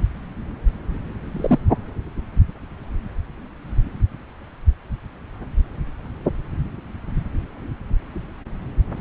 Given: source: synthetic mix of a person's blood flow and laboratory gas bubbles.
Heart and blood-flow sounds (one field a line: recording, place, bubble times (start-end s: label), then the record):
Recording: Doppler ultrasound of blood flow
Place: subclavian vein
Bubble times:
1.32-1.59 s: bubbles
From the record:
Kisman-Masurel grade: 112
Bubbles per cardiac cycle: 1 to 2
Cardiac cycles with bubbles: 1 to 10%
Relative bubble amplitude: moderate (0.250 to 0.450)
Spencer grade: 1 (occasional bubble signal discernible with the cardiac motion signal, with majority of cardiac periods free of bubbles)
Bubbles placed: anywhere in the cardiac cycle